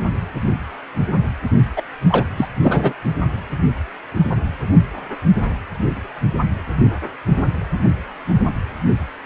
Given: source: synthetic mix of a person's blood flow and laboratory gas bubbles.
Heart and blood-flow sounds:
Doppler ultrasound of blood flow; precordium
1.76-1.82 s: bubbles
2.09-2.25 s: bubbles
2.37-2.47 s: bubbles
2.62-2.93 s: bubbles
From the record:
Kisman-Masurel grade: 213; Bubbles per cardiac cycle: several, 3 to 8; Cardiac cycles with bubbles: 1 to 10%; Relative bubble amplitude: loud (0.450 to 0.775); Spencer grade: 1 (occasional bubble signal discernible with the cardiac motion signal, with majority of cardiac periods free of bubbles); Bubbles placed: only in the low amplitude regions of the cardiac cycle

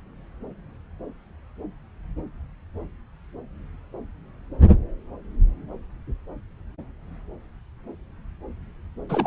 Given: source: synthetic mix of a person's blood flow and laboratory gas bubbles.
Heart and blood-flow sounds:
Doppler ultrasound of blood flow; subclavian vein
9.09-9.27 s: bubbles
From the record:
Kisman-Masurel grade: 212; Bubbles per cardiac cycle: several, 3 to 8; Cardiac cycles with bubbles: 1 to 10%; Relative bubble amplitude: moderate (0.250 to 0.450); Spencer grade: 1 (occasional bubble signal discernible with the cardiac motion signal, with majority of cardiac periods free of bubbles); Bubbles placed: anywhere in the cardiac cycle

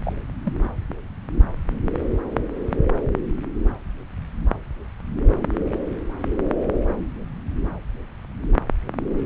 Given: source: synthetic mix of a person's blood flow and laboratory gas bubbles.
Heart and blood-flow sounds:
Doppler ultrasound of blood flow; subclavian vein
0.04-0.12 s: bubbles
0.45-0.52 s: bubbles
From the record:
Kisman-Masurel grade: 111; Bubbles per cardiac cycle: 1 to 2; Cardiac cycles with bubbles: 1 to 10%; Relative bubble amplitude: barely perceptible (0.100 to 0.250); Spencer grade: 1 (occasional bubble signal discernible with the cardiac motion signal, with majority of cardiac periods free of bubbles); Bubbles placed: anywhere in the cardiac cycle

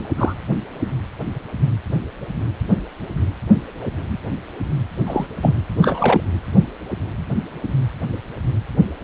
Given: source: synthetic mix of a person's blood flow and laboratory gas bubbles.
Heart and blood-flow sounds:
Doppler ultrasound of blood flow; precordium
0.00-0.03 s: bubbles
0.16-0.34 s: bubbles
5.06-5.27 s: bubbles
5.41-5.53 s: bubbles
5.82-6.21 s: bubbles
From the record:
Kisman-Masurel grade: 222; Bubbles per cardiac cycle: several, 3 to 8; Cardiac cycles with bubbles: 10 to 50%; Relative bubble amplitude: moderate (0.250 to 0.450); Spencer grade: 2 (many but less than half of the cardiac periods contain bubble signals, singularly or in groups); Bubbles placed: anywhere in the cardiac cycle

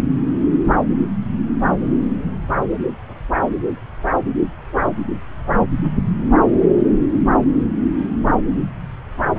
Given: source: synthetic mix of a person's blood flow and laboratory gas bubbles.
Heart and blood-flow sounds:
Doppler ultrasound of blood flow; subclavian vein
7.13-7.19 s: bubbles
From the record:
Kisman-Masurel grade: 122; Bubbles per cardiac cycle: 1 to 2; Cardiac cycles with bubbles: 10 to 50%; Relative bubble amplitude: moderate (0.250 to 0.450); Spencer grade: 2 (many but less than half of the cardiac periods contain bubble signals, singularly or in groups); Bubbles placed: anywhere in the cardiac cycle

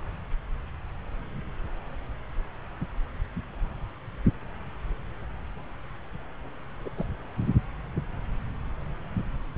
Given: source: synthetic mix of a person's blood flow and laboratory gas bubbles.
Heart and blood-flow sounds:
Doppler ultrasound of blood flow; subclavian vein
6.85-6.90 s: bubbles
6.96-7.06 s: bubbles
From the record:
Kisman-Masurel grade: 111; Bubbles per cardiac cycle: 1 to 2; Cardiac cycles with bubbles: 1 to 10%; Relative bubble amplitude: barely perceptible (0.100 to 0.250); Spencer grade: 1 (occasional bubble signal discernible with the cardiac motion signal, with majority of cardiac periods free of bubbles); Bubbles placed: anywhere in the cardiac cycle

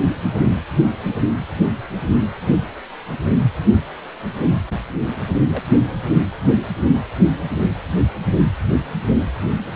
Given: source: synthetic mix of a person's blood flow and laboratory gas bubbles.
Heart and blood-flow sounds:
Doppler ultrasound of blood flow; precordium
5.47-5.62 s: bubbles
From the record:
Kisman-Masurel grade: 111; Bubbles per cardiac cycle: 1 to 2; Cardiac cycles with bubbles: 1 to 10%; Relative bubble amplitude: barely perceptible (0.100 to 0.250); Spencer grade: 1 (occasional bubble signal discernible with the cardiac motion signal, with majority of cardiac periods free of bubbles); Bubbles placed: anywhere in the cardiac cycle

